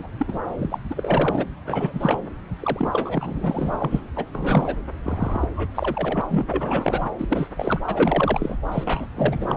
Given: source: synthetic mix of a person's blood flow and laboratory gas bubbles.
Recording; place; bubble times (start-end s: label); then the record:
Doppler ultrasound of blood flow; subclavian vein
0.00-0.07 s: bubbles
0.18-0.39 s: bubbles
0.57-0.78 s: bubbles
0.90-1.46 s: bubbles
1.66-2.19 s: bubbles
2.60-3.76 s: bubbles
3.80-4.01 s: bubbles
4.16-4.25 s: bubbles
4.34-4.76 s: bubbles
5.03-5.50 s: bubbles
5.56-5.69 s: bubbles
5.74-6.21 s: bubbles
6.29-6.45 s: bubbles
6.49-7.08 s: bubbles
7.19-7.48 s: bubbles
7.56-7.83 s: bubbles
7.88-8.57 s: bubbles
8.71-9.07 s: bubbles
9.14-9.55 s: bubbles
From the record:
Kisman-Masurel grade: 342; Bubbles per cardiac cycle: rolling drumbeat, 9 or more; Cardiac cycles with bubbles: 100%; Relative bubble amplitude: moderate (0.250 to 0.450); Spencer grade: 3 (all of the cardiac periods contain showers or single bubble signals, but not dominating or overriding the cardiac motion signals); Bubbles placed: anywhere in the cardiac cycle